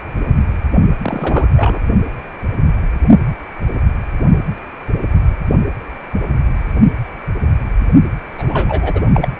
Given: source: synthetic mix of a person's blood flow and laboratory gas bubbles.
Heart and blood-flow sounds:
Doppler ultrasound of blood flow; precordium
1.01-1.45 s: bubbles
1.56-1.80 s: bubbles
8.38-9.01 s: bubbles
9.13-9.28 s: bubbles
From the record:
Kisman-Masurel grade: 222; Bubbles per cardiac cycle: several, 3 to 8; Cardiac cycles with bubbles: 10 to 50%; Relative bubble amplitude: moderate (0.250 to 0.450); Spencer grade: 2 (many but less than half of the cardiac periods contain bubble signals, singularly or in groups); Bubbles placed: only in the low amplitude regions of the cardiac cycle

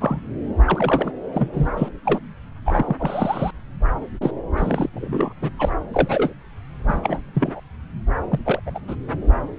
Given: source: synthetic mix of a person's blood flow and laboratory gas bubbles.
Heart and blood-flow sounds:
Doppler ultrasound of blood flow; subclavian vein
0.00-0.20 s: bubbles
0.65-1.12 s: bubbles
1.33-1.48 s: bubbles
1.53-1.69 s: bubbles
1.76-1.88 s: bubbles
2.05-2.20 s: bubbles
2.65-2.95 s: bubbles
2.99-3.51 s: bubbles
4.22-4.31 s: bubbles
4.57-4.89 s: bubbles
4.93-5.33 s: bubbles
5.42-5.50 s: bubbles
5.58-5.71 s: bubbles
5.93-6.33 s: bubbles
6.88-7.30 s: bubbles
7.34-7.60 s: bubbles
8.31-8.39 s: bubbles
8.45-8.60 s: bubbles
8.66-8.71 s: bubbles
8.74-8.79 s: bubbles
8.88-8.96 s: bubbles
From the record:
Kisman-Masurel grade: 242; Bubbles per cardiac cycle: several, 3 to 8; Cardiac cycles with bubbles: 100%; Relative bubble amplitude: moderate (0.250 to 0.450); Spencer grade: 3 (all of the cardiac periods contain showers or single bubble signals, but not dominating or overriding the cardiac motion signals); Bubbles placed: anywhere in the cardiac cycle

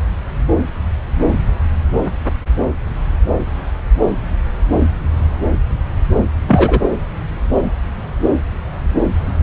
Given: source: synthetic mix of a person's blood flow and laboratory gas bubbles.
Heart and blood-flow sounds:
Doppler ultrasound of blood flow; subclavian vein
6.13-6.27 s: bubbles
6.47-6.80 s: bubbles
From the record:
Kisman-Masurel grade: 213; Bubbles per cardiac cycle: several, 3 to 8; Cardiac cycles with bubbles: 1 to 10%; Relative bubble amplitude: loud (0.450 to 0.775); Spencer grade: 1 (occasional bubble signal discernible with the cardiac motion signal, with majority of cardiac periods free of bubbles); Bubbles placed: anywhere in the cardiac cycle

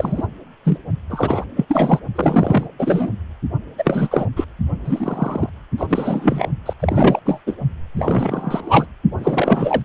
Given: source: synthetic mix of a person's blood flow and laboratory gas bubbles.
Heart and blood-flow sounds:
Doppler ultrasound of blood flow; precordium
0.00-0.27 s: bubbles
0.65-0.78 s: bubbles
1.10-1.44 s: bubbles
1.56-1.65 s: bubbles
1.68-1.99 s: bubbles
2.15-2.67 s: bubbles
2.79-3.10 s: bubbles
3.78-4.26 s: bubbles
4.36-4.45 s: bubbles
4.84-5.50 s: bubbles
5.77-5.86 s: bubbles
5.89-6.47 s: bubbles
6.65-6.73 s: bubbles
6.80-7.19 s: bubbles
7.25-7.40 s: bubbles
7.46-7.56 s: bubbles
7.97-8.87 s: bubbles
9.19-9.82 s: bubbles
From the record:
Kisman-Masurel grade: 343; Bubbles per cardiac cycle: rolling drumbeat, 9 or more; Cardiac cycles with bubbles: 100%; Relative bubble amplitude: loud (0.450 to 0.775); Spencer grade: 3 (all of the cardiac periods contain showers or single bubble signals, but not dominating or overriding the cardiac motion signals); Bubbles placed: only in the low amplitude regions of the cardiac cycle

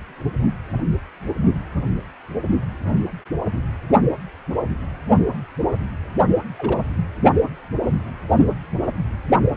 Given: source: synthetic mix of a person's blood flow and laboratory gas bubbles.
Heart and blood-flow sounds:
Doppler ultrasound of blood flow; precordium
6.58-6.79 s: bubbles
From the record:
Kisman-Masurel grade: 111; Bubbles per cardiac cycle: 1 to 2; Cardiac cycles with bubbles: 1 to 10%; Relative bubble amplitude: barely perceptible (0.100 to 0.250); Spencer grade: 1 (occasional bubble signal discernible with the cardiac motion signal, with majority of cardiac periods free of bubbles); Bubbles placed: only in the low amplitude regions of the cardiac cycle

